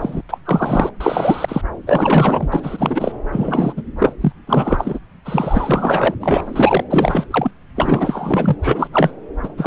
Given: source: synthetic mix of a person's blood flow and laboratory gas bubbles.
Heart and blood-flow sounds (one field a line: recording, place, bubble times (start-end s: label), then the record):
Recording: Doppler ultrasound of blood flow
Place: subclavian vein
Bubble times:
0.00-0.22 s: bubbles
0.29-0.38 s: bubbles
0.45-0.91 s: bubbles
1.00-1.61 s: bubbles
1.86-2.48 s: bubbles
2.52-3.12 s: bubbles
3.31-3.74 s: bubbles
3.77-3.83 s: bubbles
3.98-4.12 s: bubbles
4.21-4.33 s: bubbles
4.47-4.99 s: bubbles
5.25-6.15 s: bubbles
6.21-6.84 s: bubbles
6.90-7.25 s: bubbles
7.30-7.51 s: bubbles
7.75-8.54 s: bubbles
8.62-8.88 s: bubbles
8.93-9.13 s: bubbles
9.43-9.48 s: bubbles
9.57-9.67 s: bubbles
From the record:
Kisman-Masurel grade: 343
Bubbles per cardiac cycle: rolling drumbeat, 9 or more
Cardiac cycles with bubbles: 100%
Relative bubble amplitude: loud (0.450 to 0.775)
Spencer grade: 3 (all of the cardiac periods contain showers or single bubble signals, but not dominating or overriding the cardiac motion signals)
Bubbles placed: anywhere in the cardiac cycle